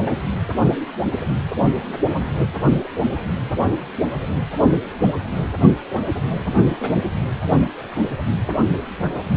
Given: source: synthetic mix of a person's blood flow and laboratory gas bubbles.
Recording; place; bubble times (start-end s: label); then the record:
Doppler ultrasound of blood flow; precordium
6.65-6.76 s: bubbles
6.79-6.93 s: bubbles
From the record:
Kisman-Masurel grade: 111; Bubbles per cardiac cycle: 1 to 2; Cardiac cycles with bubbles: 1 to 10%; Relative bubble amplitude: barely perceptible (0.100 to 0.250); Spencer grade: 1 (occasional bubble signal discernible with the cardiac motion signal, with majority of cardiac periods free of bubbles); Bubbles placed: anywhere in the cardiac cycle